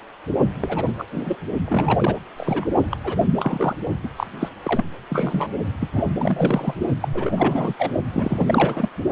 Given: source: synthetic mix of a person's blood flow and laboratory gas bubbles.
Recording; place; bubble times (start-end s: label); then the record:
Doppler ultrasound of blood flow; precordium
0.60-0.94 s: bubbles
0.98-1.04 s: bubbles
1.12-1.36 s: bubbles
1.67-2.19 s: bubbles
2.37-2.67 s: bubbles
2.91-2.96 s: bubbles
3.04-3.26 s: bubbles
3.35-3.75 s: bubbles
4.04-4.08 s: bubbles
4.16-4.26 s: bubbles
4.40-4.49 s: bubbles
4.63-4.84 s: bubbles
5.09-5.49 s: bubbles
5.80-5.88 s: bubbles
5.92-6.07 s: bubbles
6.17-6.74 s: bubbles
7.00-7.08 s: bubbles
7.14-7.33 s: bubbles
7.37-7.74 s: bubbles
7.78-7.91 s: bubbles
8.11-8.89 s: bubbles
From the record:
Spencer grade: 3 (all of the cardiac periods contain showers or single bubble signals, but not dominating or overriding the cardiac motion signals); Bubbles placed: only in the low amplitude regions of the cardiac cycle